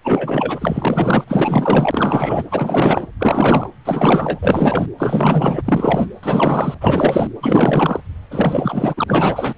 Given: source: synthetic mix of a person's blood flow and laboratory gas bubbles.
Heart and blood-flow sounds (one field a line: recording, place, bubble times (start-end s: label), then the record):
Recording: Doppler ultrasound of blood flow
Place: precordium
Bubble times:
0.03-1.24 s: bubbles
1.27-2.44 s: bubbles
2.51-3.06 s: bubbles
3.20-3.70 s: bubbles
3.85-4.40 s: bubbles
4.42-4.86 s: bubbles
4.98-5.62 s: bubbles
5.65-6.07 s: bubbles
6.23-6.75 s: bubbles
6.81-7.27 s: bubbles
7.42-8.00 s: bubbles
8.30-9.04 s: bubbles
9.08-9.54 s: bubbles
From the record:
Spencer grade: 4 (maximum detectable bubble signal sounding continuously throughout systole and diastole of every cardiac period, and overriding the amplitude of the normal cardiac signals)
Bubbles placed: anywhere in the cardiac cycle